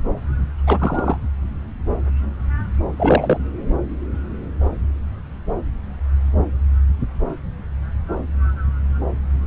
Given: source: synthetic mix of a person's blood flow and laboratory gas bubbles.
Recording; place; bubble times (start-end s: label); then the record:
Doppler ultrasound of blood flow; subclavian vein
0.67-1.18 s: bubbles
2.96-3.38 s: bubbles
From the record:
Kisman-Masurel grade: 223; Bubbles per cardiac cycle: several, 3 to 8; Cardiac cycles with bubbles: 10 to 50%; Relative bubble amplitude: loud (0.450 to 0.775); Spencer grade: 2 (many but less than half of the cardiac periods contain bubble signals, singularly or in groups); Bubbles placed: anywhere in the cardiac cycle